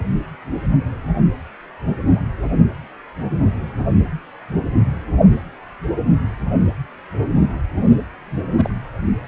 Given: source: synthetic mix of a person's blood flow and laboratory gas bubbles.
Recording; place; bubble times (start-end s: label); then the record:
Doppler ultrasound of blood flow; precordium
8.58-8.75 s: bubbles
From the record:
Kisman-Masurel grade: 112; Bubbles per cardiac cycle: 1 to 2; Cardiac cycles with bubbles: 1 to 10%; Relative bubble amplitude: moderate (0.250 to 0.450); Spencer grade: 1 (occasional bubble signal discernible with the cardiac motion signal, with majority of cardiac periods free of bubbles); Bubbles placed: anywhere in the cardiac cycle